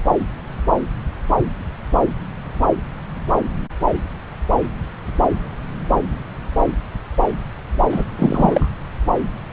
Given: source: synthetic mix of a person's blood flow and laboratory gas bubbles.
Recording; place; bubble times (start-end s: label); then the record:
Doppler ultrasound of blood flow; subclavian vein
7.90-8.04 s: bubbles
8.18-8.69 s: bubbles
From the record:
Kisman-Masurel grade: 213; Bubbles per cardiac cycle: several, 3 to 8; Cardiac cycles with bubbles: 1 to 10%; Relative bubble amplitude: loud (0.450 to 0.775); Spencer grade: 1 (occasional bubble signal discernible with the cardiac motion signal, with majority of cardiac periods free of bubbles); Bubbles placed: anywhere in the cardiac cycle